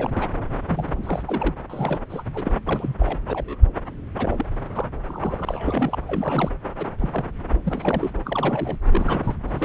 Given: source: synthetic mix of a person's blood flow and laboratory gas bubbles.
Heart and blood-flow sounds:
Doppler ultrasound of blood flow; subclavian vein
0.00-0.30 s: bubbles
0.67-1.56 s: bubbles
1.70-1.99 s: bubbles
2.09-2.24 s: bubbles
2.33-2.52 s: bubbles
2.65-2.95 s: bubbles
2.98-3.19 s: bubbles
3.25-3.58 s: bubbles
4.17-4.46 s: bubbles
4.72-4.87 s: bubbles
5.05-5.99 s: bubbles
6.07-6.50 s: bubbles
6.78-6.86 s: bubbles
6.98-7.29 s: bubbles
7.65-8.11 s: bubbles
8.24-8.76 s: bubbles
8.89-9.35 s: bubbles
9.47-9.65 s: bubbles
From the record:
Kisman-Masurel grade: 242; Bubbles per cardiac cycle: several, 3 to 8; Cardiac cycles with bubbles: 100%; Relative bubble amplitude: moderate (0.250 to 0.450); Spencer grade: 3 (all of the cardiac periods contain showers or single bubble signals, but not dominating or overriding the cardiac motion signals); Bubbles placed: anywhere in the cardiac cycle

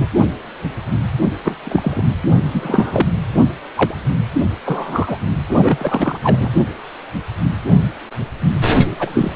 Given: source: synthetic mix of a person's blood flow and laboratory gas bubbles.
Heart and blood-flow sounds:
Doppler ultrasound of blood flow; precordium
0.00-0.08 s: bubbles
1.44-1.55 s: bubbles
1.65-2.02 s: bubbles
2.52-3.08 s: bubbles
3.75-3.95 s: bubbles
4.65-5.18 s: bubbles
5.45-6.18 s: bubbles
6.23-6.50 s: bubbles
8.99-9.35 s: bubbles
From the record:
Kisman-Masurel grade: 233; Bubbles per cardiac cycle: several, 3 to 8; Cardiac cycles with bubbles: 50 to 99%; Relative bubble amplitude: loud (0.450 to 0.775); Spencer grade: 3 (all of the cardiac periods contain showers or single bubble signals, but not dominating or overriding the cardiac motion signals); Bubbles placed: only in the low amplitude regions of the cardiac cycle

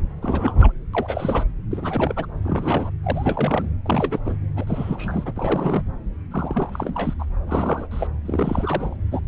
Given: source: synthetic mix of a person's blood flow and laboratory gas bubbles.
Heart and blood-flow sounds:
Doppler ultrasound of blood flow; subclavian vein
0.21-0.72 s: bubbles
0.93-1.44 s: bubbles
1.71-2.27 s: bubbles
2.44-2.91 s: bubbles
3.03-3.69 s: bubbles
3.85-4.19 s: bubbles
4.25-4.36 s: bubbles
4.56-4.65 s: bubbles
4.67-5.33 s: bubbles
5.36-5.83 s: bubbles
6.31-7.14 s: bubbles
7.19-7.25 s: bubbles
7.47-7.87 s: bubbles
7.91-8.07 s: bubbles
8.25-8.96 s: bubbles
9.11-9.21 s: bubbles
From the record:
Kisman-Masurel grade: 342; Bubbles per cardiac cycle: rolling drumbeat, 9 or more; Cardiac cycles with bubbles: 100%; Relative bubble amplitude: moderate (0.250 to 0.450); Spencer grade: 3 (all of the cardiac periods contain showers or single bubble signals, but not dominating or overriding the cardiac motion signals); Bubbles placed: anywhere in the cardiac cycle

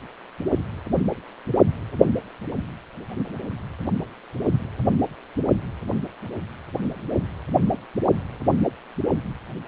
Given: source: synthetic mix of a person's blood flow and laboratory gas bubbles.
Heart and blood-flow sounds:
Doppler ultrasound of blood flow; precordium
no bubbles
From the record:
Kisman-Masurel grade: 000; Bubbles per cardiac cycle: 0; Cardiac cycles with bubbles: 0%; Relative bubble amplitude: no bubbles discernible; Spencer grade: 0 (complete lack of bubble signals)

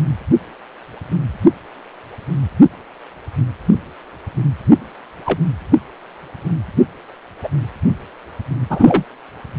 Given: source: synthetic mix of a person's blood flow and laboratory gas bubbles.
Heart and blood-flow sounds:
Doppler ultrasound of blood flow; precordium
5.25-5.39 s: bubbles
7.44-7.49 s: bubbles
8.69-9.04 s: bubbles
From the record:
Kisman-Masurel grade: 123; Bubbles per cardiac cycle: 1 to 2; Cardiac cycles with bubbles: 10 to 50%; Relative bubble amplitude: loud (0.450 to 0.775); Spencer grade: 2 (many but less than half of the cardiac periods contain bubble signals, singularly or in groups); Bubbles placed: anywhere in the cardiac cycle

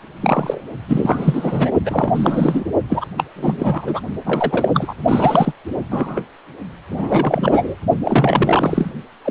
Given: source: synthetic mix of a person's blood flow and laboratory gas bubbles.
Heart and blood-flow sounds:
Doppler ultrasound of blood flow; precordium
0.21-0.60 s: bubbles
0.89-1.71 s: bubbles
1.85-2.65 s: bubbles
2.90-3.06 s: bubbles
3.17-3.23 s: bubbles
3.35-4.00 s: bubbles
4.26-4.94 s: bubbles
5.08-5.53 s: bubbles
5.89-6.22 s: bubbles
6.91-7.75 s: bubbles
8.04-8.91 s: bubbles
9.24-9.31 s: bubbles
From the record:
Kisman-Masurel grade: 343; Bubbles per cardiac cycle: rolling drumbeat, 9 or more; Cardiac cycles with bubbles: 100%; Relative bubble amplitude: loud (0.450 to 0.775); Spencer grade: 3 (all of the cardiac periods contain showers or single bubble signals, but not dominating or overriding the cardiac motion signals); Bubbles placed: only in the low amplitude regions of the cardiac cycle

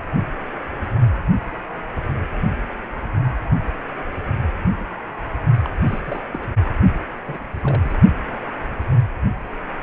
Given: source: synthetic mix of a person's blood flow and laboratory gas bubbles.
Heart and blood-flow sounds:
Doppler ultrasound of blood flow; precordium
5.66-5.70 s: bubbles
5.82-6.00 s: bubbles
6.04-6.25 s: bubbles
6.33-6.49 s: bubbles
7.26-7.47 s: bubbles
7.54-7.82 s: bubbles
7.84-7.98 s: bubbles
From the record:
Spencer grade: 2 (many but less than half of the cardiac periods contain bubble signals, singularly or in groups); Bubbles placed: only in the low amplitude regions of the cardiac cycle

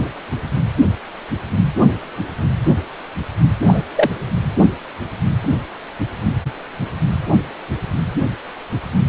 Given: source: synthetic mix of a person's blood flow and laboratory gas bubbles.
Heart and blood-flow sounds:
Doppler ultrasound of blood flow; precordium
3.67-3.83 s: bubbles
3.95-4.10 s: bubbles
From the record:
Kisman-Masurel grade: 113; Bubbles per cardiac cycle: 1 to 2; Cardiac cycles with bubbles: 1 to 10%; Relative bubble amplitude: loud (0.450 to 0.775); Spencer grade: 1 (occasional bubble signal discernible with the cardiac motion signal, with majority of cardiac periods free of bubbles); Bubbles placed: anywhere in the cardiac cycle

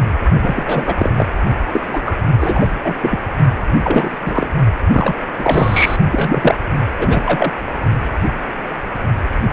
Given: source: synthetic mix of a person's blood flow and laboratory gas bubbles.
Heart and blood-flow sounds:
Doppler ultrasound of blood flow; precordium
0.41-0.95 s: bubbles
0.97-1.12 s: bubbles
1.17-1.27 s: bubbles
1.72-1.81 s: bubbles
1.88-2.00 s: bubbles
2.05-2.18 s: bubbles
2.40-2.68 s: bubbles
2.83-2.95 s: bubbles
3.00-3.20 s: bubbles
3.83-4.16 s: bubbles
4.25-4.49 s: bubbles
4.92-5.14 s: bubbles
5.38-5.96 s: bubbles
6.11-6.55 s: bubbles
6.98-7.52 s: bubbles
From the record:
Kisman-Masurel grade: 333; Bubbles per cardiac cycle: rolling drumbeat, 9 or more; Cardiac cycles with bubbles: 50 to 99%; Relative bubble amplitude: loud (0.450 to 0.775); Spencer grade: 3 (all of the cardiac periods contain showers or single bubble signals, but not dominating or overriding the cardiac motion signals); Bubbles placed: only in the low amplitude regions of the cardiac cycle

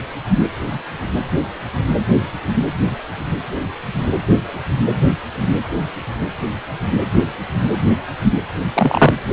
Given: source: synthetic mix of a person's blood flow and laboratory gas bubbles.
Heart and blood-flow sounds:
Doppler ultrasound of blood flow; precordium
8.74-9.11 s: bubbles
From the record:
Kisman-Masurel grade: 123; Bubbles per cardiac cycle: 1 to 2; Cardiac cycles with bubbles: 10 to 50%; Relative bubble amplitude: loud (0.450 to 0.775); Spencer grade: 2 (many but less than half of the cardiac periods contain bubble signals, singularly or in groups); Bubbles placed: anywhere in the cardiac cycle

